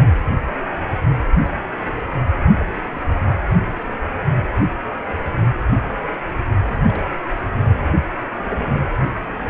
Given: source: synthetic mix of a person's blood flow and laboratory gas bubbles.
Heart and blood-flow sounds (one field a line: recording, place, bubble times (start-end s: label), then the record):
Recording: Doppler ultrasound of blood flow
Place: precordium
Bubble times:
2.58-2.65 s: bubbles
3.21-3.37 s: bubbles
5.85-5.90 s: bubbles
6.88-7.02 s: bubbles
7.37-7.47 s: bubbles
From the record:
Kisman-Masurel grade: 121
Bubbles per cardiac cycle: 1 to 2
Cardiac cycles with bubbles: 10 to 50%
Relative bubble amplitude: barely perceptible (0.100 to 0.250)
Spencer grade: 2 (many but less than half of the cardiac periods contain bubble signals, singularly or in groups)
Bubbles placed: only in the low amplitude regions of the cardiac cycle